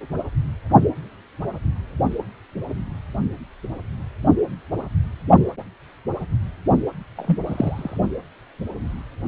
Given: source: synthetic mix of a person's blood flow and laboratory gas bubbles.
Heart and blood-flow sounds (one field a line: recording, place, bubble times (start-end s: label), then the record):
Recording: Doppler ultrasound of blood flow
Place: precordium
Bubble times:
7.16-7.38 s: bubbles
7.46-7.98 s: bubbles
From the record:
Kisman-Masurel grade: 112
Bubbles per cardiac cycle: 1 to 2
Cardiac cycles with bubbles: 1 to 10%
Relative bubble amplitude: moderate (0.250 to 0.450)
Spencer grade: 1 (occasional bubble signal discernible with the cardiac motion signal, with majority of cardiac periods free of bubbles)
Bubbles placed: only in the low amplitude regions of the cardiac cycle